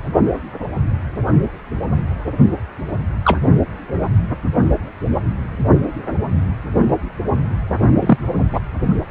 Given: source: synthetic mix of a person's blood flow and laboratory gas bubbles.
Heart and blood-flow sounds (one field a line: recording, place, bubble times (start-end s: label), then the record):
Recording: Doppler ultrasound of blood flow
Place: precordium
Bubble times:
3.25-3.40 s: bubbles
7.99-8.18 s: bubbles
8.52-8.61 s: bubbles
From the record:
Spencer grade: 2 (many but less than half of the cardiac periods contain bubble signals, singularly or in groups)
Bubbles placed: only in the low amplitude regions of the cardiac cycle